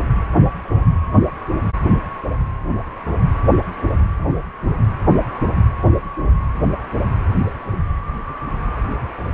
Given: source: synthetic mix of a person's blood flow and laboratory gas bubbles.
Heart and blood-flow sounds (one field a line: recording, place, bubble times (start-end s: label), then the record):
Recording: Doppler ultrasound of blood flow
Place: precordium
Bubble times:
no bubbles
From the record:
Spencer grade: 0 (complete lack of bubble signals)